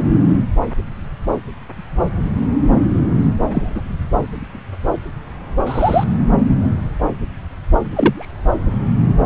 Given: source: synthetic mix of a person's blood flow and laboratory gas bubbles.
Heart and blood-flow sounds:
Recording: Doppler ultrasound of blood flow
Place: subclavian vein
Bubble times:
3.51-3.81 s: bubbles
5.66-6.04 s: bubbles
7.93-8.32 s: bubbles
From the record:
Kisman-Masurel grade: 123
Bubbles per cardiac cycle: 1 to 2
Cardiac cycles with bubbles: 10 to 50%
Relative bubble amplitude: loud (0.450 to 0.775)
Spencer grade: 2 (many but less than half of the cardiac periods contain bubble signals, singularly or in groups)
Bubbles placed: anywhere in the cardiac cycle

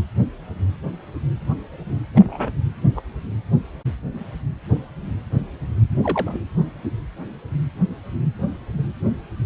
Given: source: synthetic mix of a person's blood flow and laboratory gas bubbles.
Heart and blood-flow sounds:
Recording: Doppler ultrasound of blood flow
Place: precordium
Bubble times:
2.15-2.51 s: bubbles
2.95-3.01 s: bubbles
6.04-6.40 s: bubbles
From the record:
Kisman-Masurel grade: 121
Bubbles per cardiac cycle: 1 to 2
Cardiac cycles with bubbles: 10 to 50%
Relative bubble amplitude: barely perceptible (0.100 to 0.250)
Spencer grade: 2 (many but less than half of the cardiac periods contain bubble signals, singularly or in groups)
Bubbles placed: anywhere in the cardiac cycle

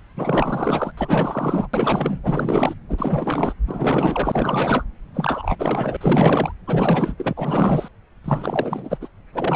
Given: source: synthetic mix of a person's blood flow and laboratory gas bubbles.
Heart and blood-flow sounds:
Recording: Doppler ultrasound of blood flow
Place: subclavian vein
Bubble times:
0.16-0.92 s: bubbles
0.97-1.68 s: bubbles
1.73-2.17 s: bubbles
2.23-2.75 s: bubbles
2.88-3.54 s: bubbles
3.67-4.85 s: bubbles
5.14-5.96 s: bubbles
6.01-6.53 s: bubbles
6.67-7.14 s: bubbles
7.17-7.33 s: bubbles
7.36-7.88 s: bubbles
8.24-8.97 s: bubbles
9.01-9.09 s: bubbles
9.33-9.56 s: bubbles
From the record:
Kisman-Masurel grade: 444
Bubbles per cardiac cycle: continuous sound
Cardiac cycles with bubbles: 100%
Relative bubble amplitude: maximal (0.775 to 0.999)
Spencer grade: 4 (maximum detectable bubble signal sounding continuously throughout systole and diastole of every cardiac period, and overriding the amplitude of the normal cardiac signals)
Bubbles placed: anywhere in the cardiac cycle

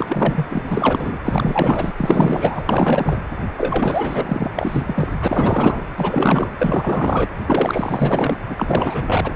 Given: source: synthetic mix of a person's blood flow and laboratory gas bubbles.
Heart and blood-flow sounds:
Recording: Doppler ultrasound of blood flow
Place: precordium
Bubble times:
0.00-0.46 s: bubbles
0.50-1.19 s: bubbles
1.24-1.92 s: bubbles
1.97-2.66 s: bubbles
2.69-3.21 s: bubbles
3.57-4.51 s: bubbles
4.55-5.12 s: bubbles
5.20-5.84 s: bubbles
5.96-6.50 s: bubbles
6.58-7.28 s: bubbles
7.46-8.38 s: bubbles
8.49-9.32 s: bubbles
From the record:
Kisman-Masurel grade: 444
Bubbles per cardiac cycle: continuous sound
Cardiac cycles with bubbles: 100%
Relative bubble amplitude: maximal (0.775 to 0.999)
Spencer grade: 4 (maximum detectable bubble signal sounding continuously throughout systole and diastole of every cardiac period, and overriding the amplitude of the normal cardiac signals)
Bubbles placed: anywhere in the cardiac cycle

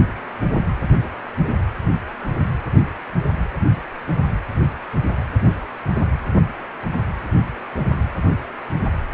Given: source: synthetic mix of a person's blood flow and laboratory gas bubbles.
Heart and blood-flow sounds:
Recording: Doppler ultrasound of blood flow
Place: precordium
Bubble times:
no bubbles
From the record:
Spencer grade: 0 (complete lack of bubble signals)

